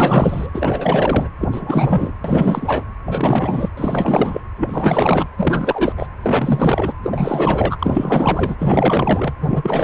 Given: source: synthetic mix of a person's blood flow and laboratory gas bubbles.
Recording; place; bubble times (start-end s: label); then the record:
Doppler ultrasound of blood flow; precordium
0.00-0.50 s: bubbles
0.54-1.28 s: bubbles
1.40-2.11 s: bubbles
2.24-2.83 s: bubbles
3.06-3.69 s: bubbles
3.77-4.41 s: bubbles
4.58-5.28 s: bubbles
5.37-5.92 s: bubbles
5.96-6.06 s: bubbles
6.22-6.93 s: bubbles
7.02-8.56 s: bubbles
8.58-9.34 s: bubbles
9.41-9.83 s: bubbles
From the record:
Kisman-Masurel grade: 444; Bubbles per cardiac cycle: continuous sound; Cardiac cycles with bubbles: 100%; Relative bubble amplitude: maximal (0.775 to 0.999); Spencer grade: 4 (maximum detectable bubble signal sounding continuously throughout systole and diastole of every cardiac period, and overriding the amplitude of the normal cardiac signals); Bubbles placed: anywhere in the cardiac cycle